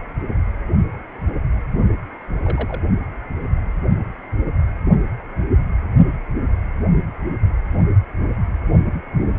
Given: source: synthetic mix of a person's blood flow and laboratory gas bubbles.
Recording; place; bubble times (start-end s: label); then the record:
Doppler ultrasound of blood flow; precordium
2.44-2.81 s: bubbles
From the record:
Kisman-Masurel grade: 111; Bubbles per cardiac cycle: 1 to 2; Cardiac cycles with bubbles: 1 to 10%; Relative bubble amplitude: barely perceptible (0.100 to 0.250); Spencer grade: 1 (occasional bubble signal discernible with the cardiac motion signal, with majority of cardiac periods free of bubbles); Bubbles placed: only in the low amplitude regions of the cardiac cycle